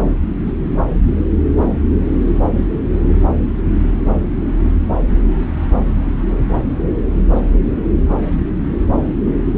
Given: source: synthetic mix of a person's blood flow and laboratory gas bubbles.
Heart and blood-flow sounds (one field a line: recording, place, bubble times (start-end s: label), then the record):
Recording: Doppler ultrasound of blood flow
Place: subclavian vein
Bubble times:
0.46-0.53 s: bubbles
From the record:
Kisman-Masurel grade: 113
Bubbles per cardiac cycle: 1 to 2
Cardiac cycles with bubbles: 1 to 10%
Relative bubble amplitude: loud (0.450 to 0.775)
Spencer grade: 1 (occasional bubble signal discernible with the cardiac motion signal, with majority of cardiac periods free of bubbles)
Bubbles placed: anywhere in the cardiac cycle